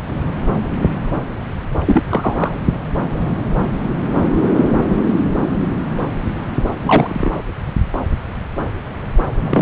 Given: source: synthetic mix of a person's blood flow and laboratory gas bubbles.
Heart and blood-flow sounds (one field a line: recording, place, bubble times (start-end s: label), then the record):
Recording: Doppler ultrasound of blood flow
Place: subclavian vein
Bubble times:
1.87-2.02 s: bubbles
2.09-2.54 s: bubbles
6.83-7.32 s: bubbles
9.40-9.62 s: bubbles
From the record:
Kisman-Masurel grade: 223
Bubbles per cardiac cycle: several, 3 to 8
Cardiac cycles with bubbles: 10 to 50%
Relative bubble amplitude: loud (0.450 to 0.775)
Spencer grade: 2 (many but less than half of the cardiac periods contain bubble signals, singularly or in groups)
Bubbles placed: anywhere in the cardiac cycle